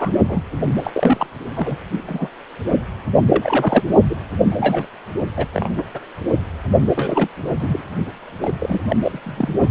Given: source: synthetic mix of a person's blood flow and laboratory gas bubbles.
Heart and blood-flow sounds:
Doppler ultrasound of blood flow; precordium
0.00-0.11 s: bubbles
0.28-0.42 s: bubbles
0.65-0.73 s: bubbles
0.83-1.30 s: bubbles
1.55-1.78 s: bubbles
1.92-2.01 s: bubbles
2.06-2.28 s: bubbles
3.29-3.83 s: bubbles
4.09-4.15 s: bubbles
4.46-4.87 s: bubbles
5.37-5.47 s: bubbles
5.54-5.69 s: bubbles
5.77-5.84 s: bubbles
5.94-6.00 s: bubbles
6.95-7.29 s: bubbles
7.59-7.83 s: bubbles
8.41-8.54 s: bubbles
8.59-8.81 s: bubbles
8.88-8.96 s: bubbles
9.02-9.18 s: bubbles
9.23-9.67 s: bubbles
From the record:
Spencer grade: 3 (all of the cardiac periods contain showers or single bubble signals, but not dominating or overriding the cardiac motion signals); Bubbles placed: only in the low amplitude regions of the cardiac cycle

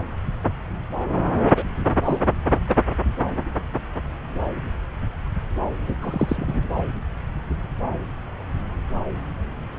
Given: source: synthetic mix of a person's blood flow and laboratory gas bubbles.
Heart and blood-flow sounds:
Doppler ultrasound of blood flow; subclavian vein
1.55-1.64 s: bubbles
2.03-2.19 s: bubbles
2.67-2.75 s: bubbles
5.87-5.95 s: bubbles
6.01-6.62 s: bubbles
6.75-6.83 s: bubbles
From the record:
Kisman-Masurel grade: 222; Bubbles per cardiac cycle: several, 3 to 8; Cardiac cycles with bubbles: 10 to 50%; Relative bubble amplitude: moderate (0.250 to 0.450); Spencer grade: 2 (many but less than half of the cardiac periods contain bubble signals, singularly or in groups); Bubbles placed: anywhere in the cardiac cycle

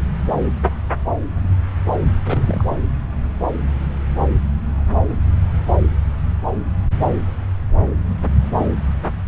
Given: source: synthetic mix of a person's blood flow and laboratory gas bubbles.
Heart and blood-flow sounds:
Doppler ultrasound of blood flow; subclavian vein
2.25-2.77 s: bubbles
From the record:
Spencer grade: 1 (occasional bubble signal discernible with the cardiac motion signal, with majority of cardiac periods free of bubbles); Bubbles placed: anywhere in the cardiac cycle

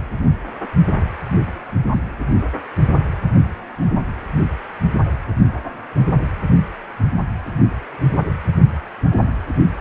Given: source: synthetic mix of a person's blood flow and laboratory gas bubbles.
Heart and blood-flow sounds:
Doppler ultrasound of blood flow; precordium
1.91-2.02 s: bubbles
From the record:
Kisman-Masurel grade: 111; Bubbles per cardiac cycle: 1 to 2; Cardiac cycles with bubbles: 1 to 10%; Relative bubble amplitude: barely perceptible (0.100 to 0.250); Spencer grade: 1 (occasional bubble signal discernible with the cardiac motion signal, with majority of cardiac periods free of bubbles); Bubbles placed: only in the low amplitude regions of the cardiac cycle

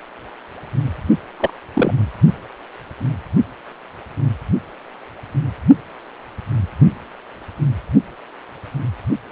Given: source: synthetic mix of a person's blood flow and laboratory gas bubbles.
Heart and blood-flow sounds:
Doppler ultrasound of blood flow; precordium
1.40-1.50 s: bubbles
1.74-1.94 s: bubbles
From the record:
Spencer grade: 1 (occasional bubble signal discernible with the cardiac motion signal, with majority of cardiac periods free of bubbles); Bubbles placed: only in the low amplitude regions of the cardiac cycle

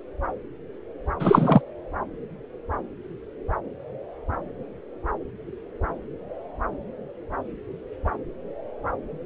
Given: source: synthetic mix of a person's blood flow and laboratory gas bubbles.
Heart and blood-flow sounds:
Doppler ultrasound of blood flow; subclavian vein
1.19-1.61 s: bubbles
From the record:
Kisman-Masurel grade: 213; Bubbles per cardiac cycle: several, 3 to 8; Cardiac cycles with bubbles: 1 to 10%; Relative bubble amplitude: loud (0.450 to 0.775); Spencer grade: 1 (occasional bubble signal discernible with the cardiac motion signal, with majority of cardiac periods free of bubbles); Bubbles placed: anywhere in the cardiac cycle

